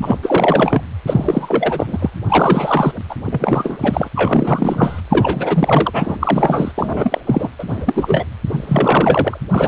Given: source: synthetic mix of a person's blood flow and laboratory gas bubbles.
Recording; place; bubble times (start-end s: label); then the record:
Doppler ultrasound of blood flow; precordium
0.00-0.17 s: bubbles
0.23-0.81 s: bubbles
1.06-2.10 s: bubbles
2.29-2.92 s: bubbles
3.08-3.15 s: bubbles
3.25-3.77 s: bubbles
3.81-4.09 s: bubbles
4.15-5.01 s: bubbles
5.09-6.17 s: bubbles
6.21-6.72 s: bubbles
6.78-7.21 s: bubbles
7.26-7.49 s: bubbles
7.58-7.64 s: bubbles
7.67-8.25 s: bubbles
8.47-9.38 s: bubbles
9.51-9.68 s: bubbles
From the record:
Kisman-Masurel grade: 333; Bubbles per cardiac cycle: rolling drumbeat, 9 or more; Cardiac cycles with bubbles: 50 to 99%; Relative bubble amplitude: loud (0.450 to 0.775); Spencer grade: 3 (all of the cardiac periods contain showers or single bubble signals, but not dominating or overriding the cardiac motion signals); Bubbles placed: anywhere in the cardiac cycle